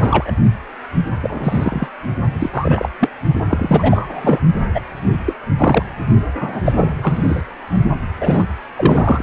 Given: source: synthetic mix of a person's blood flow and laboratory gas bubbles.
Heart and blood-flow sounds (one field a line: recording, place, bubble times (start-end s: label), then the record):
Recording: Doppler ultrasound of blood flow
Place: precordium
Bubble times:
0.00-0.34 s: bubbles
1.22-1.88 s: bubbles
2.40-2.50 s: bubbles
2.52-2.89 s: bubbles
3.00-3.10 s: bubbles
3.48-4.39 s: bubbles
4.74-4.81 s: bubbles
5.26-5.34 s: bubbles
5.57-5.83 s: bubbles
6.40-6.62 s: bubbles
6.65-6.94 s: bubbles
7.02-7.43 s: bubbles
8.20-8.45 s: bubbles
8.76-9.23 s: bubbles
From the record:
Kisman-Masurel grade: 243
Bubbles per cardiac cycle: several, 3 to 8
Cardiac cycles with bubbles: 100%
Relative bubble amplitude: loud (0.450 to 0.775)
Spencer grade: 3 (all of the cardiac periods contain showers or single bubble signals, but not dominating or overriding the cardiac motion signals)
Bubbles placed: only in the low amplitude regions of the cardiac cycle